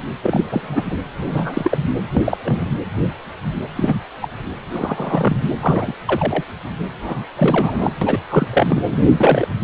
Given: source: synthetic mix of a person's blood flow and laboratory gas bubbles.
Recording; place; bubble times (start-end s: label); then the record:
Doppler ultrasound of blood flow; precordium
0.22-0.97 s: bubbles
1.17-1.78 s: bubbles
2.14-2.22 s: bubbles
2.25-2.38 s: bubbles
2.44-2.71 s: bubbles
3.76-3.96 s: bubbles
4.21-4.29 s: bubbles
4.71-5.45 s: bubbles
5.60-5.93 s: bubbles
6.05-6.44 s: bubbles
7.03-7.26 s: bubbles
7.36-7.94 s: bubbles
8.01-8.18 s: bubbles
8.29-8.46 s: bubbles
8.53-8.83 s: bubbles
8.91-8.98 s: bubbles
9.03-9.48 s: bubbles
From the record:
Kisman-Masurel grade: 243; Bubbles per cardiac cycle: several, 3 to 8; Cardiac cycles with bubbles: 100%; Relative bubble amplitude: loud (0.450 to 0.775); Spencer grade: 3 (all of the cardiac periods contain showers or single bubble signals, but not dominating or overriding the cardiac motion signals); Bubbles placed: anywhere in the cardiac cycle